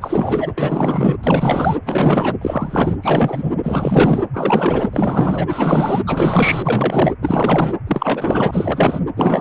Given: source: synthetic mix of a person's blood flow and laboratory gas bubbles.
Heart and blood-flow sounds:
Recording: Doppler ultrasound of blood flow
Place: precordium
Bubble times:
0.01-0.54 s: bubbles
0.57-1.76 s: bubbles
1.83-2.36 s: bubbles
2.41-2.96 s: bubbles
3.01-3.53 s: bubbles
3.63-4.23 s: bubbles
4.33-5.47 s: bubbles
5.50-6.02 s: bubbles
6.06-7.14 s: bubbles
7.22-7.74 s: bubbles
7.87-8.99 s: bubbles
9.16-9.41 s: bubbles
From the record:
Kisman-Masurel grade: 444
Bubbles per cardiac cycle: continuous sound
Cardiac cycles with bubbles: 100%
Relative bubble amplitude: maximal (0.775 to 0.999)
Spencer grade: 4 (maximum detectable bubble signal sounding continuously throughout systole and diastole of every cardiac period, and overriding the amplitude of the normal cardiac signals)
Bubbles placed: anywhere in the cardiac cycle

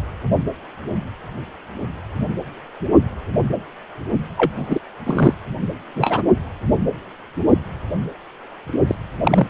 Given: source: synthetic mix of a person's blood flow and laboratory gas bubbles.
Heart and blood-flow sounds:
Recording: Doppler ultrasound of blood flow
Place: precordium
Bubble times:
4.37-4.51 s: bubbles
4.56-4.79 s: bubbles
5.05-5.33 s: bubbles
5.96-6.22 s: bubbles
8.87-8.96 s: bubbles
9.23-9.48 s: bubbles
From the record:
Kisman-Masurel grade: 223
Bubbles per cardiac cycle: several, 3 to 8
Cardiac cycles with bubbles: 10 to 50%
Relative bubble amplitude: loud (0.450 to 0.775)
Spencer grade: 2 (many but less than half of the cardiac periods contain bubble signals, singularly or in groups)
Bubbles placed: only in the low amplitude regions of the cardiac cycle

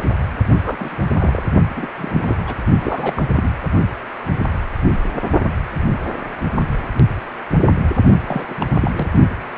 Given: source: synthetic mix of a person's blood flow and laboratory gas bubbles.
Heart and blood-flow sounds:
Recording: Doppler ultrasound of blood flow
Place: precordium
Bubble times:
0.64-0.96 s: bubbles
1.20-1.44 s: bubbles
1.76-1.88 s: bubbles
1.97-2.55 s: bubbles
2.80-3.13 s: bubbles
3.16-3.23 s: bubbles
3.36-3.48 s: bubbles
8.27-8.46 s: bubbles
8.50-8.54 s: bubbles
8.61-8.66 s: bubbles
8.73-8.91 s: bubbles
8.95-9.07 s: bubbles
From the record:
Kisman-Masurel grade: 222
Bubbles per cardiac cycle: several, 3 to 8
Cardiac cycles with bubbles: 10 to 50%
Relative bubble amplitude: moderate (0.250 to 0.450)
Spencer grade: 2 (many but less than half of the cardiac periods contain bubble signals, singularly or in groups)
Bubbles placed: only in the low amplitude regions of the cardiac cycle

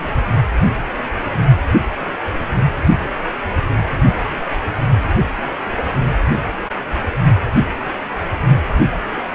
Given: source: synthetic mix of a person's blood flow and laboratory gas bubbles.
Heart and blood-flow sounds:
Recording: Doppler ultrasound of blood flow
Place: precordium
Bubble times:
no bubbles
From the record:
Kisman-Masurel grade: 000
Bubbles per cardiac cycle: 0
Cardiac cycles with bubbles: 0%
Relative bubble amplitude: no bubbles discernible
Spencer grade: 0 (complete lack of bubble signals)

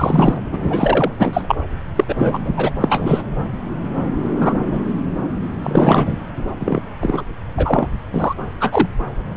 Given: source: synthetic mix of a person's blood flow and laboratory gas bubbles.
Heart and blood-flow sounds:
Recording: Doppler ultrasound of blood flow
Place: subclavian vein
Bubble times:
0.00-0.41 s: bubbles
0.51-1.12 s: bubbles
1.19-1.55 s: bubbles
1.95-2.04 s: bubbles
2.08-2.51 s: bubbles
2.56-2.71 s: bubbles
2.80-3.22 s: bubbles
4.40-4.54 s: bubbles
4.66-4.79 s: bubbles
5.62-6.18 s: bubbles
6.59-6.80 s: bubbles
7.00-7.22 s: bubbles
7.57-7.87 s: bubbles
8.12-8.34 s: bubbles
8.60-8.88 s: bubbles
From the record:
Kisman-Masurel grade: 233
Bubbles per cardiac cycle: several, 3 to 8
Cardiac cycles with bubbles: 50 to 99%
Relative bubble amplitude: loud (0.450 to 0.775)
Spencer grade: 3 (all of the cardiac periods contain showers or single bubble signals, but not dominating or overriding the cardiac motion signals)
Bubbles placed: anywhere in the cardiac cycle

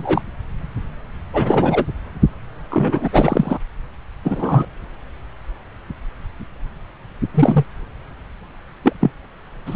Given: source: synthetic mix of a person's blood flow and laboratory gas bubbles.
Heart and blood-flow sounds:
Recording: Doppler ultrasound of blood flow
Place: subclavian vein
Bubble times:
0.00-0.21 s: bubbles
1.33-1.85 s: bubbles
2.70-3.08 s: bubbles
3.12-3.58 s: bubbles
4.24-4.65 s: bubbles
7.34-7.65 s: bubbles
8.83-8.92 s: bubbles
9.00-9.11 s: bubbles
9.65-9.76 s: bubbles
From the record:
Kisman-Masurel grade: 223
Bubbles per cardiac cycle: several, 3 to 8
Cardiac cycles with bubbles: 10 to 50%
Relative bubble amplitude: loud (0.450 to 0.775)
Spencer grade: 2 (many but less than half of the cardiac periods contain bubble signals, singularly or in groups)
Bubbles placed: anywhere in the cardiac cycle

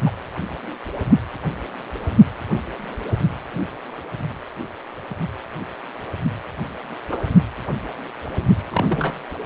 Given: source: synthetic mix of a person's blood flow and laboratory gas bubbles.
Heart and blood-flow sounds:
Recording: Doppler ultrasound of blood flow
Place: precordium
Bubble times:
0.05-0.11 s: bubbles
7.11-7.19 s: bubbles
8.71-9.14 s: bubbles
From the record:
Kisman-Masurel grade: 122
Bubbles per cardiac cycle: 1 to 2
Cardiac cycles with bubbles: 10 to 50%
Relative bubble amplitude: moderate (0.250 to 0.450)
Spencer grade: 2 (many but less than half of the cardiac periods contain bubble signals, singularly or in groups)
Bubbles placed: anywhere in the cardiac cycle

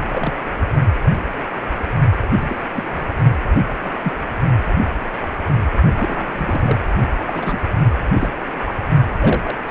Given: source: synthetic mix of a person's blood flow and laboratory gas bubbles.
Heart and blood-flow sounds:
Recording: Doppler ultrasound of blood flow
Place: precordium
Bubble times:
0.10-0.32 s: bubbles
2.38-2.64 s: bubbles
2.74-3.07 s: bubbles
3.85-3.94 s: bubbles
4.02-4.12 s: bubbles
5.95-6.75 s: bubbles
7.17-7.23 s: bubbles
7.26-7.58 s: bubbles
8.14-8.31 s: bubbles
8.66-8.75 s: bubbles
9.19-9.57 s: bubbles
9.67-9.71 s: bubbles
From the record:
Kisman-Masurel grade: 232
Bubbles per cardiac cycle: several, 3 to 8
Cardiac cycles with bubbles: 50 to 99%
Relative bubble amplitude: moderate (0.250 to 0.450)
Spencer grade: 3 (all of the cardiac periods contain showers or single bubble signals, but not dominating or overriding the cardiac motion signals)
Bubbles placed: only in the low amplitude regions of the cardiac cycle

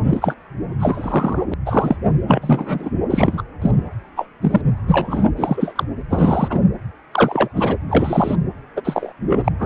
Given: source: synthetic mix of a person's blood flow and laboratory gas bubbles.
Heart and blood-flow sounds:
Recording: Doppler ultrasound of blood flow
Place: precordium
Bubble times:
0.09-0.37 s: bubbles
0.79-1.45 s: bubbles
1.51-1.54 s: bubbles
1.66-1.96 s: bubbles
2.27-2.90 s: bubbles
3.10-3.43 s: bubbles
3.62-3.71 s: bubbles
4.16-4.29 s: bubbles
4.42-4.61 s: bubbles
4.77-4.79 s: bubbles
4.87-5.31 s: bubbles
5.36-5.83 s: bubbles
6.09-6.60 s: bubbles
7.12-7.48 s: bubbles
7.54-7.74 s: bubbles
7.89-8.35 s: bubbles
8.76-8.81 s: bubbles
8.84-9.12 s: bubbles
9.29-9.41 s: bubbles
9.44-9.48 s: bubbles
9.59-9.66 s: bubbles
From the record:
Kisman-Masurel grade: 243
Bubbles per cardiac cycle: several, 3 to 8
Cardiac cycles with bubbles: 100%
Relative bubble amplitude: loud (0.450 to 0.775)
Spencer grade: 3 (all of the cardiac periods contain showers or single bubble signals, but not dominating or overriding the cardiac motion signals)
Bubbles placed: anywhere in the cardiac cycle

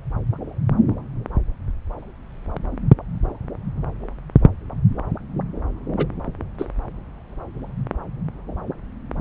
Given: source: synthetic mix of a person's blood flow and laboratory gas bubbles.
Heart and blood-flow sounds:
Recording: Doppler ultrasound of blood flow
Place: subclavian vein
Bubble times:
5.97-6.06 s: bubbles
6.58-6.65 s: bubbles
From the record:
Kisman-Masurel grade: 112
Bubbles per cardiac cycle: 1 to 2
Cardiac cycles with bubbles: 1 to 10%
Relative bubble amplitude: moderate (0.250 to 0.450)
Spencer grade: 1 (occasional bubble signal discernible with the cardiac motion signal, with majority of cardiac periods free of bubbles)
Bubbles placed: anywhere in the cardiac cycle

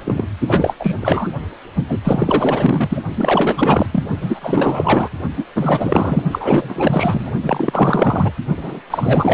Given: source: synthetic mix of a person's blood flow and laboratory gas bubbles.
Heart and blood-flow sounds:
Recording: Doppler ultrasound of blood flow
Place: precordium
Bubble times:
0.04-0.28 s: bubbles
0.47-0.75 s: bubbles
0.79-0.95 s: bubbles
0.99-1.30 s: bubbles
1.88-1.99 s: bubbles
2.04-3.02 s: bubbles
3.15-3.87 s: bubbles
3.91-4.04 s: bubbles
4.21-5.09 s: bubbles
5.37-5.45 s: bubbles
5.55-6.22 s: bubbles
6.31-7.31 s: bubbles
7.43-8.32 s: bubbles
8.57-8.81 s: bubbles
8.90-9.34 s: bubbles
From the record:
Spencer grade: 4 (maximum detectable bubble signal sounding continuously throughout systole and diastole of every cardiac period, and overriding the amplitude of the normal cardiac signals)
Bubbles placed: only in the low amplitude regions of the cardiac cycle

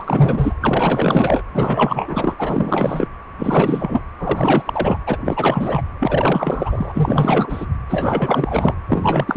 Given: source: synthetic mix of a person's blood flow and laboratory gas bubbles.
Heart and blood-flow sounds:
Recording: Doppler ultrasound of blood flow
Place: precordium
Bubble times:
0.00-0.54 s: bubbles
0.61-1.42 s: bubbles
1.54-3.08 s: bubbles
3.38-4.00 s: bubbles
4.19-4.97 s: bubbles
5.07-5.18 s: bubbles
5.24-5.82 s: bubbles
6.00-7.66 s: bubbles
7.88-8.75 s: bubbles
8.88-9.37 s: bubbles
From the record:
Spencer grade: 4 (maximum detectable bubble signal sounding continuously throughout systole and diastole of every cardiac period, and overriding the amplitude of the normal cardiac signals)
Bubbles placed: anywhere in the cardiac cycle

